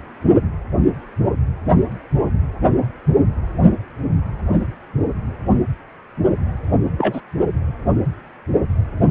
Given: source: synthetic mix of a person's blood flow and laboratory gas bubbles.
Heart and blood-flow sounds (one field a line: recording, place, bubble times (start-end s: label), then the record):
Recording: Doppler ultrasound of blood flow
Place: precordium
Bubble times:
6.98-7.21 s: bubbles
From the record:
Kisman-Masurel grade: 113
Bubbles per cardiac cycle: 1 to 2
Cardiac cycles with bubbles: 1 to 10%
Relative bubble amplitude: loud (0.450 to 0.775)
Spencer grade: 1 (occasional bubble signal discernible with the cardiac motion signal, with majority of cardiac periods free of bubbles)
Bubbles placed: anywhere in the cardiac cycle